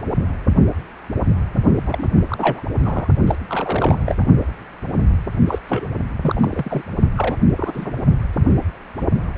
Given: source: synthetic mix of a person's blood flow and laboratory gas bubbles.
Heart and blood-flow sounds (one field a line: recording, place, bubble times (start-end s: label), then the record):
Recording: Doppler ultrasound of blood flow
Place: precordium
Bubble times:
1.86-2.07 s: bubbles
2.16-2.24 s: bubbles
2.29-2.63 s: bubbles
2.83-3.08 s: bubbles
3.27-3.35 s: bubbles
3.49-4.24 s: bubbles
5.46-5.59 s: bubbles
5.67-5.87 s: bubbles
6.21-6.82 s: bubbles
7.16-7.38 s: bubbles
7.56-7.93 s: bubbles
From the record:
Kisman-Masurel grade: 332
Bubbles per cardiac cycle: rolling drumbeat, 9 or more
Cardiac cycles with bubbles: 50 to 99%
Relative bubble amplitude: moderate (0.250 to 0.450)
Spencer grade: 3 (all of the cardiac periods contain showers or single bubble signals, but not dominating or overriding the cardiac motion signals)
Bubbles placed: only in the low amplitude regions of the cardiac cycle